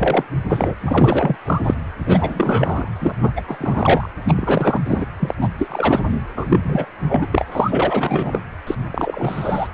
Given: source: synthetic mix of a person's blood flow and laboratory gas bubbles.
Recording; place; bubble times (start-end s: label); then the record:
Doppler ultrasound of blood flow; precordium
0.00-0.24 s: bubbles
0.49-0.74 s: bubbles
0.80-1.36 s: bubbles
1.45-1.61 s: bubbles
1.64-1.74 s: bubbles
1.99-2.89 s: bubbles
3.00-3.15 s: bubbles
3.23-3.32 s: bubbles
3.36-3.42 s: bubbles
3.48-4.09 s: bubbles
4.25-4.80 s: bubbles
4.85-5.05 s: bubbles
5.19-5.34 s: bubbles
5.40-5.49 s: bubbles
5.58-6.24 s: bubbles
6.36-6.86 s: bubbles
7.08-7.26 s: bubbles
7.31-7.46 s: bubbles
7.51-8.41 s: bubbles
8.67-8.75 s: bubbles
8.92-9.68 s: bubbles
From the record:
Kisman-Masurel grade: 333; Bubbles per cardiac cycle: rolling drumbeat, 9 or more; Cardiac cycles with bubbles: 50 to 99%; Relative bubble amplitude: loud (0.450 to 0.775); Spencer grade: 3 (all of the cardiac periods contain showers or single bubble signals, but not dominating or overriding the cardiac motion signals); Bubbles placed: anywhere in the cardiac cycle